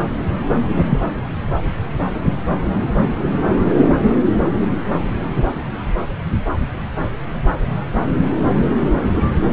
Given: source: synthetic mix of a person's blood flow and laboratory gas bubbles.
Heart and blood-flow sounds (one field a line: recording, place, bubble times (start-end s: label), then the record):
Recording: Doppler ultrasound of blood flow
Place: subclavian vein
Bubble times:
0.90-1.00 s: bubbles
From the record:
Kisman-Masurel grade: 113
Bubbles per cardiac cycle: 1 to 2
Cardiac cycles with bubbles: 1 to 10%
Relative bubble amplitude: loud (0.450 to 0.775)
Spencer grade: 1 (occasional bubble signal discernible with the cardiac motion signal, with majority of cardiac periods free of bubbles)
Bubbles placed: anywhere in the cardiac cycle